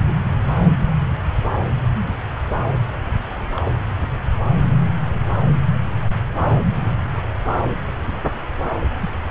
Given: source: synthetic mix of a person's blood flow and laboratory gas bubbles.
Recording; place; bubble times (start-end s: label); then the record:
Doppler ultrasound of blood flow; subclavian vein
0.01-0.14 s: bubbles
3.54-3.72 s: bubbles
9.02-9.09 s: bubbles
From the record:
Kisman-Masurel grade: 121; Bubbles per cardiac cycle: 1 to 2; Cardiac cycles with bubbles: 10 to 50%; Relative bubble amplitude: barely perceptible (0.100 to 0.250); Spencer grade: 2 (many but less than half of the cardiac periods contain bubble signals, singularly or in groups); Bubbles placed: anywhere in the cardiac cycle